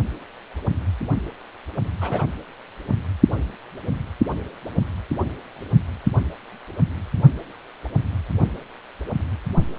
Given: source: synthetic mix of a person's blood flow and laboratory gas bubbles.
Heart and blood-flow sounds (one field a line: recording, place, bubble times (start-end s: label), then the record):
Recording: Doppler ultrasound of blood flow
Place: precordium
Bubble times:
2.00-2.26 s: bubbles
From the record:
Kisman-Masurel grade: 111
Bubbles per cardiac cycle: 1 to 2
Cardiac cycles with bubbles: 1 to 10%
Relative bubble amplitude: barely perceptible (0.100 to 0.250)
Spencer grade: 1 (occasional bubble signal discernible with the cardiac motion signal, with majority of cardiac periods free of bubbles)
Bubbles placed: only in the low amplitude regions of the cardiac cycle